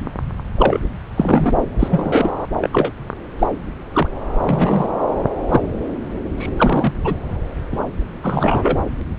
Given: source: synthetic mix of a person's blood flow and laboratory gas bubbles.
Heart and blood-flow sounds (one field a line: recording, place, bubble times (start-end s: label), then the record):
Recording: Doppler ultrasound of blood flow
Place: subclavian vein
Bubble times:
0.55-0.78 s: bubbles
1.17-1.51 s: bubbles
1.79-2.31 s: bubbles
2.60-2.92 s: bubbles
3.39-3.47 s: bubbles
3.93-4.08 s: bubbles
4.42-4.88 s: bubbles
5.49-5.62 s: bubbles
6.38-6.49 s: bubbles
6.57-6.93 s: bubbles
6.99-7.15 s: bubbles
7.72-7.80 s: bubbles
8.22-8.78 s: bubbles
From the record:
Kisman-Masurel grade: 243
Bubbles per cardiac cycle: several, 3 to 8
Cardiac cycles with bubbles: 100%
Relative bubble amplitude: loud (0.450 to 0.775)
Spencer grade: 3 (all of the cardiac periods contain showers or single bubble signals, but not dominating or overriding the cardiac motion signals)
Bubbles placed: anywhere in the cardiac cycle